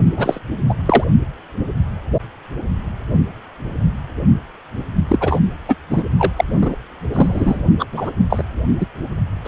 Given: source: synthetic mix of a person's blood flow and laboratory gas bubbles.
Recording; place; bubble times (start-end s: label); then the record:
Doppler ultrasound of blood flow; precordium
0.16-0.38 s: bubbles
0.69-0.74 s: bubbles
0.85-1.04 s: bubbles
5.08-5.39 s: bubbles
5.68-5.75 s: bubbles
5.90-6.04 s: bubbles
6.19-6.32 s: bubbles
6.36-6.44 s: bubbles
6.62-6.76 s: bubbles
7.13-7.61 s: bubbles
7.79-7.86 s: bubbles
7.92-8.12 s: bubbles
8.29-8.43 s: bubbles
8.80-8.87 s: bubbles
9.45-9.48 s: bubbles
From the record:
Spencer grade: 3 (all of the cardiac periods contain showers or single bubble signals, but not dominating or overriding the cardiac motion signals); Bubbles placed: only in the low amplitude regions of the cardiac cycle